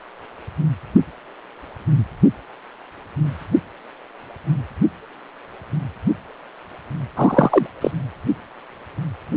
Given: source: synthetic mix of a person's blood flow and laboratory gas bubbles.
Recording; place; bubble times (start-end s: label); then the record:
Doppler ultrasound of blood flow; precordium
7.16-7.67 s: bubbles
7.81-7.91 s: bubbles
From the record:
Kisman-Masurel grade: 223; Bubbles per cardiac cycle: several, 3 to 8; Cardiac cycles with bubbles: 10 to 50%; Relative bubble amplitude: loud (0.450 to 0.775); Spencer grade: 2 (many but less than half of the cardiac periods contain bubble signals, singularly or in groups); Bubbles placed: anywhere in the cardiac cycle